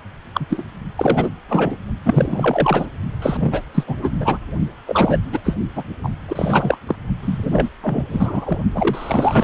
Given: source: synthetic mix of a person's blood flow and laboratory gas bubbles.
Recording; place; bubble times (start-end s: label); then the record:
Doppler ultrasound of blood flow; precordium
0.34-0.46 s: bubbles
0.49-0.63 s: bubbles
0.95-1.30 s: bubbles
1.48-1.75 s: bubbles
2.05-2.87 s: bubbles
3.21-3.61 s: bubbles
3.74-3.84 s: bubbles
3.87-3.97 s: bubbles
4.01-4.10 s: bubbles
4.20-4.39 s: bubbles
4.87-5.18 s: bubbles
5.32-5.40 s: bubbles
5.44-5.56 s: bubbles
5.76-5.83 s: bubbles
6.04-6.08 s: bubbles
6.28-6.79 s: bubbles
6.87-6.96 s: bubbles
7.22-7.70 s: bubbles
7.82-8.58 s: bubbles
8.74-9.44 s: bubbles
From the record:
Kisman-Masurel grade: 342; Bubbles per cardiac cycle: rolling drumbeat, 9 or more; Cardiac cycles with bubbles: 100%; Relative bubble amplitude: moderate (0.250 to 0.450); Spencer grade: 3 (all of the cardiac periods contain showers or single bubble signals, but not dominating or overriding the cardiac motion signals); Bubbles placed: only in the low amplitude regions of the cardiac cycle